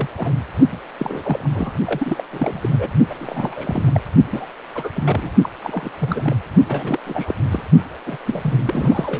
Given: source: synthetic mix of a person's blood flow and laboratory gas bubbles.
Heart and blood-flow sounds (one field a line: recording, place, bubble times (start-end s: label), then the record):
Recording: Doppler ultrasound of blood flow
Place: precordium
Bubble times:
0.00-0.07 s: bubbles
0.17-0.33 s: bubbles
0.72-0.77 s: bubbles
0.99-1.50 s: bubbles
1.55-1.78 s: bubbles
1.86-2.24 s: bubbles
2.32-2.89 s: bubbles
3.09-4.00 s: bubbles
4.31-4.46 s: bubbles
4.75-4.88 s: bubbles
4.94-5.31 s: bubbles
5.42-5.49 s: bubbles
5.63-5.90 s: bubbles
6.00-6.35 s: bubbles
6.65-7.00 s: bubbles
7.05-7.35 s: bubbles
7.51-7.62 s: bubbles
8.06-8.18 s: bubbles
8.26-9.19 s: bubbles
From the record:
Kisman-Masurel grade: 342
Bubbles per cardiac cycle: rolling drumbeat, 9 or more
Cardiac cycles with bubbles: 100%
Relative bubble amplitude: moderate (0.250 to 0.450)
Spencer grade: 3 (all of the cardiac periods contain showers or single bubble signals, but not dominating or overriding the cardiac motion signals)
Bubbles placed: only in the low amplitude regions of the cardiac cycle